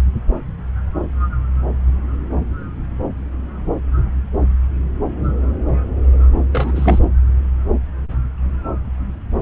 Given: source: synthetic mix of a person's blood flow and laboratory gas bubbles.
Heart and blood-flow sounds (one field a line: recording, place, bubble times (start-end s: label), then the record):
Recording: Doppler ultrasound of blood flow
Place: subclavian vein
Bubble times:
6.52-6.99 s: bubbles
From the record:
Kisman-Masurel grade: 213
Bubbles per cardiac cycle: several, 3 to 8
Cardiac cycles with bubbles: 1 to 10%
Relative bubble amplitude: loud (0.450 to 0.775)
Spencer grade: 1 (occasional bubble signal discernible with the cardiac motion signal, with majority of cardiac periods free of bubbles)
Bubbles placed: anywhere in the cardiac cycle